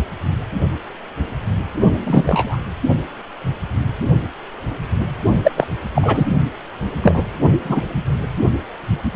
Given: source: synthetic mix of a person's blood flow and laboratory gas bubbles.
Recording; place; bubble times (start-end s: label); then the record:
Doppler ultrasound of blood flow; precordium
2.03-2.57 s: bubbles
5.44-5.52 s: bubbles
5.57-5.67 s: bubbles
5.95-6.26 s: bubbles
7.02-7.23 s: bubbles
7.63-7.81 s: bubbles
From the record:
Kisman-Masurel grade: 223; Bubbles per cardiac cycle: several, 3 to 8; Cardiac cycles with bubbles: 10 to 50%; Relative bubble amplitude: loud (0.450 to 0.775); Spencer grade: 2 (many but less than half of the cardiac periods contain bubble signals, singularly or in groups); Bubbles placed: only in the low amplitude regions of the cardiac cycle